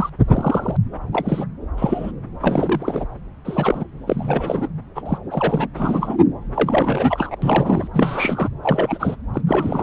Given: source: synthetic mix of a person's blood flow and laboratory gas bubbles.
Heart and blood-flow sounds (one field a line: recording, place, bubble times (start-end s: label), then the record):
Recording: Doppler ultrasound of blood flow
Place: subclavian vein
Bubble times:
0.00-0.09 s: bubbles
0.28-0.77 s: bubbles
1.12-1.44 s: bubbles
1.76-2.12 s: bubbles
2.42-3.05 s: bubbles
3.45-3.85 s: bubbles
4.06-4.68 s: bubbles
4.95-5.02 s: bubbles
5.05-5.18 s: bubbles
5.30-5.67 s: bubbles
5.75-6.17 s: bubbles
6.54-7.35 s: bubbles
7.42-7.88 s: bubbles
7.93-8.49 s: bubbles
8.63-9.16 s: bubbles
9.33-9.41 s: bubbles
9.47-9.82 s: bubbles
From the record:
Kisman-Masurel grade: 242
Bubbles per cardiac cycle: several, 3 to 8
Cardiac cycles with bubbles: 100%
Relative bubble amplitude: moderate (0.250 to 0.450)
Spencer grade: 3 (all of the cardiac periods contain showers or single bubble signals, but not dominating or overriding the cardiac motion signals)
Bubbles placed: anywhere in the cardiac cycle